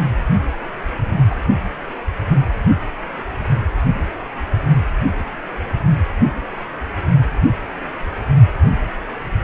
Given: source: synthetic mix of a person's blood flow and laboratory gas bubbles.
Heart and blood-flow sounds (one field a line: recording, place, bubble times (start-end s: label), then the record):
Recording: Doppler ultrasound of blood flow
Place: precordium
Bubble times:
1.29-1.35 s: bubbles
From the record:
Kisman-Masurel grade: 112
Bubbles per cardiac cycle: 1 to 2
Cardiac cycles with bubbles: 1 to 10%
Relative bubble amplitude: moderate (0.250 to 0.450)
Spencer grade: 1 (occasional bubble signal discernible with the cardiac motion signal, with majority of cardiac periods free of bubbles)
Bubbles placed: only in the low amplitude regions of the cardiac cycle